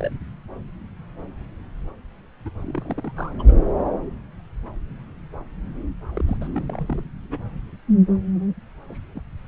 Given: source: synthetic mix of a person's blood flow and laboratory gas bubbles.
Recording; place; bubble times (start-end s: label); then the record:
Doppler ultrasound of blood flow; subclavian vein
0.00-0.11 s: bubbles
2.45-2.50 s: bubbles
2.64-3.12 s: bubbles
3.16-3.31 s: bubbles
3.39-3.43 s: bubbles
3.48-3.52 s: bubbles
6.15-6.24 s: bubbles
6.27-6.37 s: bubbles
6.40-6.47 s: bubbles
6.52-7.09 s: bubbles
7.30-7.39 s: bubbles
8.89-8.97 s: bubbles
9.14-9.20 s: bubbles
From the record:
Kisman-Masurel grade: 221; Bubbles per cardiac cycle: several, 3 to 8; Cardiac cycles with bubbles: 10 to 50%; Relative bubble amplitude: barely perceptible (0.100 to 0.250); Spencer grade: 2 (many but less than half of the cardiac periods contain bubble signals, singularly or in groups); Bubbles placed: anywhere in the cardiac cycle